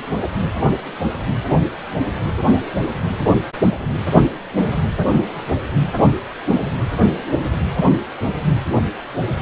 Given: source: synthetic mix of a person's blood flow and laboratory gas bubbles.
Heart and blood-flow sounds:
Doppler ultrasound of blood flow; precordium
0.22-0.28 s: bubbles
From the record:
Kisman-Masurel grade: 112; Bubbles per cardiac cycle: 1 to 2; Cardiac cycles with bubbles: 1 to 10%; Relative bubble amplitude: moderate (0.250 to 0.450); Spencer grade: 1 (occasional bubble signal discernible with the cardiac motion signal, with majority of cardiac periods free of bubbles); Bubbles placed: anywhere in the cardiac cycle

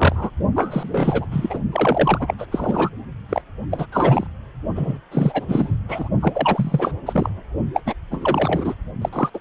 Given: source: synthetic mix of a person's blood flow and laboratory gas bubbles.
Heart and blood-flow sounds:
Doppler ultrasound of blood flow; precordium
0.00-0.30 s: bubbles
0.55-1.26 s: bubbles
1.31-1.59 s: bubbles
1.72-2.34 s: bubbles
2.38-2.46 s: bubbles
2.51-2.90 s: bubbles
3.29-3.42 s: bubbles
3.71-3.86 s: bubbles
3.92-4.27 s: bubbles
4.75-4.98 s: bubbles
5.11-5.45 s: bubbles
5.47-5.76 s: bubbles
5.88-6.08 s: bubbles
6.20-6.92 s: bubbles
7.06-7.30 s: bubbles
7.74-7.81 s: bubbles
7.85-7.93 s: bubbles
8.11-8.75 s: bubbles
9.01-9.09 s: bubbles
9.12-9.29 s: bubbles
9.34-9.39 s: bubbles
From the record:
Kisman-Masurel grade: 332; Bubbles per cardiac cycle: rolling drumbeat, 9 or more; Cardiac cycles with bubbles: 50 to 99%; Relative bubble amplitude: moderate (0.250 to 0.450); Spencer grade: 3 (all of the cardiac periods contain showers or single bubble signals, but not dominating or overriding the cardiac motion signals); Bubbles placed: only in the low amplitude regions of the cardiac cycle

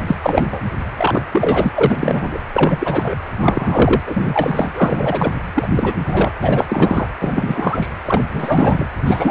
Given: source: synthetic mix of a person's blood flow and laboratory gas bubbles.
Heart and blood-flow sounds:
Doppler ultrasound of blood flow; precordium
0.00-0.02 s: bubbles
0.07-0.16 s: bubbles
0.22-0.61 s: bubbles
0.97-1.22 s: bubbles
1.31-1.69 s: bubbles
1.75-2.38 s: bubbles
2.54-3.15 s: bubbles
3.40-4.00 s: bubbles
4.06-4.72 s: bubbles
4.75-5.32 s: bubbles
5.55-5.67 s: bubbles
5.76-5.94 s: bubbles
6.07-6.31 s: bubbles
6.41-6.65 s: bubbles
6.69-7.07 s: bubbles
7.19-7.88 s: bubbles
8.05-8.25 s: bubbles
8.33-8.88 s: bubbles
9.05-9.31 s: bubbles
From the record:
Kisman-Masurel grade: 343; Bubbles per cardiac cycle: rolling drumbeat, 9 or more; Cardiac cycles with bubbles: 100%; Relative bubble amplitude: loud (0.450 to 0.775); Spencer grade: 3 (all of the cardiac periods contain showers or single bubble signals, but not dominating or overriding the cardiac motion signals); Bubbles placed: anywhere in the cardiac cycle

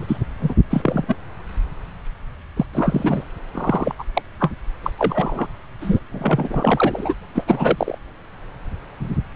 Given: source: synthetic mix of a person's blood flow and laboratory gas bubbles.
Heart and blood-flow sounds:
Doppler ultrasound of blood flow; subclavian vein
0.00-0.17 s: bubbles
0.42-0.55 s: bubbles
0.70-1.04 s: bubbles
1.08-1.16 s: bubbles
2.56-2.66 s: bubbles
2.74-3.24 s: bubbles
3.54-3.95 s: bubbles
3.98-4.04 s: bubbles
4.13-4.22 s: bubbles
4.40-4.51 s: bubbles
4.83-4.91 s: bubbles
4.99-5.47 s: bubbles
5.81-6.00 s: bubbles
6.12-7.14 s: bubbles
7.35-7.44 s: bubbles
7.46-7.98 s: bubbles
From the record:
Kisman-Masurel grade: 233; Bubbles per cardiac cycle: several, 3 to 8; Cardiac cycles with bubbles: 50 to 99%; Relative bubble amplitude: loud (0.450 to 0.775); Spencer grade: 3 (all of the cardiac periods contain showers or single bubble signals, but not dominating or overriding the cardiac motion signals); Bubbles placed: anywhere in the cardiac cycle

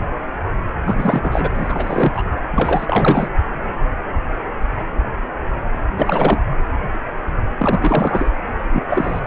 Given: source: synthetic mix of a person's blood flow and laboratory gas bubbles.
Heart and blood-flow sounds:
Doppler ultrasound of blood flow; precordium
0.85-1.50 s: bubbles
1.54-2.23 s: bubbles
2.51-3.30 s: bubbles
5.98-6.42 s: bubbles
7.58-8.30 s: bubbles
8.72-8.86 s: bubbles
8.88-9.21 s: bubbles
From the record:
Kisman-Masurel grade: 333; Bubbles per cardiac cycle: rolling drumbeat, 9 or more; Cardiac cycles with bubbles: 50 to 99%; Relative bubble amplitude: loud (0.450 to 0.775); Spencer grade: 3 (all of the cardiac periods contain showers or single bubble signals, but not dominating or overriding the cardiac motion signals); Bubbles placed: anywhere in the cardiac cycle

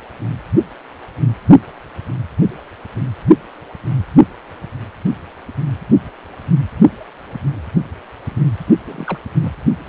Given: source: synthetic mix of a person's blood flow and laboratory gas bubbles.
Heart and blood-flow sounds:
Doppler ultrasound of blood flow; precordium
8.86-9.18 s: bubbles
9.41-9.53 s: bubbles
From the record:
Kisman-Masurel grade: 221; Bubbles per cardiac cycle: several, 3 to 8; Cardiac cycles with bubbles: 10 to 50%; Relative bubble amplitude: barely perceptible (0.100 to 0.250); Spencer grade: 2 (many but less than half of the cardiac periods contain bubble signals, singularly or in groups); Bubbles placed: only in the low amplitude regions of the cardiac cycle

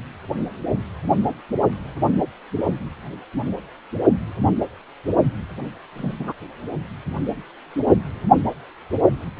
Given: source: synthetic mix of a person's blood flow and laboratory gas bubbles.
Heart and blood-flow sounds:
Doppler ultrasound of blood flow; precordium
5.97-6.15 s: bubbles
6.18-6.33 s: bubbles
From the record:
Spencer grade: 1 (occasional bubble signal discernible with the cardiac motion signal, with majority of cardiac periods free of bubbles); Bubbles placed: only in the low amplitude regions of the cardiac cycle

